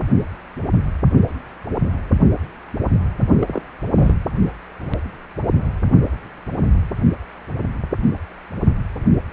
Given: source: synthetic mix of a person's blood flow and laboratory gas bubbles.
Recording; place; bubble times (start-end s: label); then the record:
Doppler ultrasound of blood flow; precordium
3.39-3.62 s: bubbles
3.95-4.14 s: bubbles
From the record:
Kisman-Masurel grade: 212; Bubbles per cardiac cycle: several, 3 to 8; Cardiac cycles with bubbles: 1 to 10%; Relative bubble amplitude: moderate (0.250 to 0.450); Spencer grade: 1 (occasional bubble signal discernible with the cardiac motion signal, with majority of cardiac periods free of bubbles); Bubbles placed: only in the low amplitude regions of the cardiac cycle